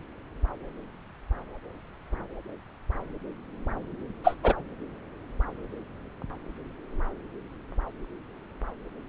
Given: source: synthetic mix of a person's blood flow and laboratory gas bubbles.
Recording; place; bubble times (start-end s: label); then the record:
Doppler ultrasound of blood flow; subclavian vein
4.24-4.35 s: bubbles
4.43-4.53 s: bubbles
From the record:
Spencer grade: 1 (occasional bubble signal discernible with the cardiac motion signal, with majority of cardiac periods free of bubbles); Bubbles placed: anywhere in the cardiac cycle